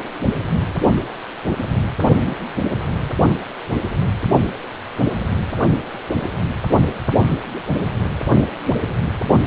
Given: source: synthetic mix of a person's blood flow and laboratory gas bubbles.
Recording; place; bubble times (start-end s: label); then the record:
Doppler ultrasound of blood flow; precordium
2.25-2.35 s: bubbles
From the record:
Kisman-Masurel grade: 112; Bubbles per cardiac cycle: 1 to 2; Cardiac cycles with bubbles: 1 to 10%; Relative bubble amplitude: moderate (0.250 to 0.450); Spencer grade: 1 (occasional bubble signal discernible with the cardiac motion signal, with majority of cardiac periods free of bubbles); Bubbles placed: only in the low amplitude regions of the cardiac cycle